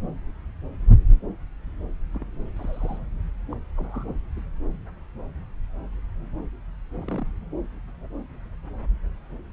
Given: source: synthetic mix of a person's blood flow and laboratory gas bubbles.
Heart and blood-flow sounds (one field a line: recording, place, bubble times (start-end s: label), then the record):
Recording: Doppler ultrasound of blood flow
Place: subclavian vein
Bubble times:
2.14-2.25 s: bubbles
2.56-2.99 s: bubbles
3.52-3.55 s: bubbles
3.77-4.13 s: bubbles
4.37-4.41 s: bubbles
6.96-7.27 s: bubbles
From the record:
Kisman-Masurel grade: 121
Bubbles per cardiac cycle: 1 to 2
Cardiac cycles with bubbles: 10 to 50%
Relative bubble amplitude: barely perceptible (0.100 to 0.250)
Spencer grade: 2 (many but less than half of the cardiac periods contain bubble signals, singularly or in groups)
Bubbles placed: anywhere in the cardiac cycle